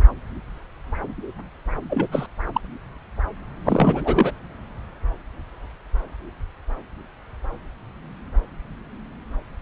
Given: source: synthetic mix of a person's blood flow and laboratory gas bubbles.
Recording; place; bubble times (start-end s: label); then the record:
Doppler ultrasound of blood flow; subclavian vein
1.90-2.07 s: bubbles
2.11-2.26 s: bubbles
2.54-2.61 s: bubbles
3.65-4.32 s: bubbles
From the record:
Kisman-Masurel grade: 222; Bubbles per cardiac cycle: several, 3 to 8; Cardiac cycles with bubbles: 10 to 50%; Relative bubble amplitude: moderate (0.250 to 0.450); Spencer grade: 2 (many but less than half of the cardiac periods contain bubble signals, singularly or in groups); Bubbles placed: anywhere in the cardiac cycle